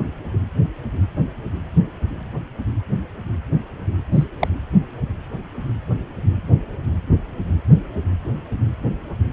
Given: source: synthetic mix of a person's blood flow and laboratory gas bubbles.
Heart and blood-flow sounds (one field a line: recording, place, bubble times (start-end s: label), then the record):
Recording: Doppler ultrasound of blood flow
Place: precordium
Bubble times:
4.12-4.27 s: bubbles
4.40-4.48 s: bubbles
From the record:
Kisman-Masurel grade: 112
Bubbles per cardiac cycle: 1 to 2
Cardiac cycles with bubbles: 1 to 10%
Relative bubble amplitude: moderate (0.250 to 0.450)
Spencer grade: 1 (occasional bubble signal discernible with the cardiac motion signal, with majority of cardiac periods free of bubbles)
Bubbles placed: anywhere in the cardiac cycle